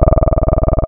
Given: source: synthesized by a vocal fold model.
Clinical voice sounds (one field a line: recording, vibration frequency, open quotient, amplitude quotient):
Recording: sustained vowel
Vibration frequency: 20 Hz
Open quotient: 0.3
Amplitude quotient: 1.4